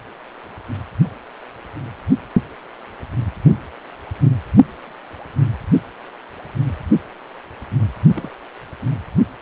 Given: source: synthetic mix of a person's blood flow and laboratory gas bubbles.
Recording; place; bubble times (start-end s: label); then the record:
Doppler ultrasound of blood flow; precordium
8.16-8.34 s: bubbles
From the record:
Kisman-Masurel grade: 111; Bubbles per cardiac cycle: 1 to 2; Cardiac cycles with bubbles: 1 to 10%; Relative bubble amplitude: barely perceptible (0.100 to 0.250); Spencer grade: 1 (occasional bubble signal discernible with the cardiac motion signal, with majority of cardiac periods free of bubbles); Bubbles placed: only in the low amplitude regions of the cardiac cycle